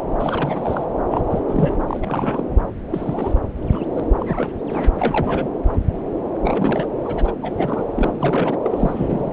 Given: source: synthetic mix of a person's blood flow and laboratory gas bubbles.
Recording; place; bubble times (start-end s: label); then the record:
Doppler ultrasound of blood flow; subclavian vein
0.18-0.85 s: bubbles
1.10-1.21 s: bubbles
1.30-1.41 s: bubbles
1.48-1.73 s: bubbles
1.88-2.44 s: bubbles
2.90-3.33 s: bubbles
3.71-3.84 s: bubbles
3.96-4.00 s: bubbles
4.19-4.51 s: bubbles
4.69-4.89 s: bubbles
4.94-5.49 s: bubbles
6.42-6.86 s: bubbles
7.04-7.33 s: bubbles
7.42-7.84 s: bubbles
7.95-8.57 s: bubbles
8.62-9.31 s: bubbles
From the record:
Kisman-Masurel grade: 332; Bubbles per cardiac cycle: rolling drumbeat, 9 or more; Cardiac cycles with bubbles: 50 to 99%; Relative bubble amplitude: moderate (0.250 to 0.450); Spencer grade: 3 (all of the cardiac periods contain showers or single bubble signals, but not dominating or overriding the cardiac motion signals); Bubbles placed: anywhere in the cardiac cycle